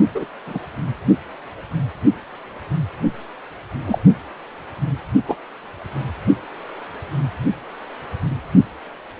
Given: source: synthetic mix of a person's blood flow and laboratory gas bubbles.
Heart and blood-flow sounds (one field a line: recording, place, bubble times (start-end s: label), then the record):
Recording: Doppler ultrasound of blood flow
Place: precordium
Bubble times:
0.14-0.26 s: bubbles
0.46-0.59 s: bubbles
3.87-4.00 s: bubbles
5.28-5.36 s: bubbles
From the record:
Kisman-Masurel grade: 123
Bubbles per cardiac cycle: 1 to 2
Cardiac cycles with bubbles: 10 to 50%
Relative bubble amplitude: loud (0.450 to 0.775)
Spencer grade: 2 (many but less than half of the cardiac periods contain bubble signals, singularly or in groups)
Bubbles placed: anywhere in the cardiac cycle